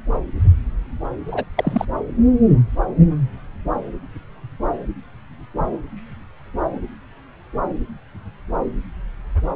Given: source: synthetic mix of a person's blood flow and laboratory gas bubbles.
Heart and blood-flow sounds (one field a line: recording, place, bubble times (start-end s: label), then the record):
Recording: Doppler ultrasound of blood flow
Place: subclavian vein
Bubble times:
1.27-1.44 s: bubbles
1.56-1.85 s: bubbles
From the record:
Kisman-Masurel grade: 212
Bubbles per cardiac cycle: several, 3 to 8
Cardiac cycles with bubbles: 1 to 10%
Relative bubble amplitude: moderate (0.250 to 0.450)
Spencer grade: 1 (occasional bubble signal discernible with the cardiac motion signal, with majority of cardiac periods free of bubbles)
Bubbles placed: anywhere in the cardiac cycle